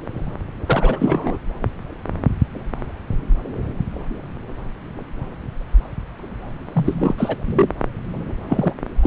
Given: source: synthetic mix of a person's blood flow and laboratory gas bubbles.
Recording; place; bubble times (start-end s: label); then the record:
Doppler ultrasound of blood flow; subclavian vein
0.66-1.37 s: bubbles
6.74-7.14 s: bubbles
7.17-7.36 s: bubbles
7.45-7.69 s: bubbles
8.47-8.73 s: bubbles
9.03-9.07 s: bubbles
From the record:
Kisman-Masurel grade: 222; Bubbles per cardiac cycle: several, 3 to 8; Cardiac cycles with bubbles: 10 to 50%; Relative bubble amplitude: moderate (0.250 to 0.450); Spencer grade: 2 (many but less than half of the cardiac periods contain bubble signals, singularly or in groups); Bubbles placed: anywhere in the cardiac cycle